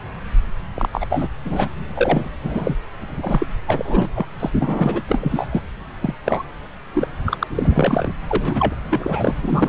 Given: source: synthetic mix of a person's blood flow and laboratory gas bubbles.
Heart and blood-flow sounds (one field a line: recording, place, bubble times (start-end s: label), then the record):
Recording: Doppler ultrasound of blood flow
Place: subclavian vein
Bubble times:
0.74-0.89 s: bubbles
0.92-1.06 s: bubbles
1.10-1.28 s: bubbles
1.45-1.69 s: bubbles
1.94-2.29 s: bubbles
2.43-2.79 s: bubbles
3.02-3.46 s: bubbles
3.67-4.09 s: bubbles
4.15-4.26 s: bubbles
4.40-4.50 s: bubbles
4.60-5.02 s: bubbles
5.08-5.62 s: bubbles
6.01-6.14 s: bubbles
6.25-6.43 s: bubbles
6.94-7.08 s: bubbles
7.26-7.37 s: bubbles
7.39-7.46 s: bubbles
7.55-8.10 s: bubbles
8.28-8.75 s: bubbles
8.91-9.35 s: bubbles
9.42-9.69 s: bubbles
From the record:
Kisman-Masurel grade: 242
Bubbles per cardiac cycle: several, 3 to 8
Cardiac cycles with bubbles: 100%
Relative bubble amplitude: moderate (0.250 to 0.450)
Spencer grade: 3 (all of the cardiac periods contain showers or single bubble signals, but not dominating or overriding the cardiac motion signals)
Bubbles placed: anywhere in the cardiac cycle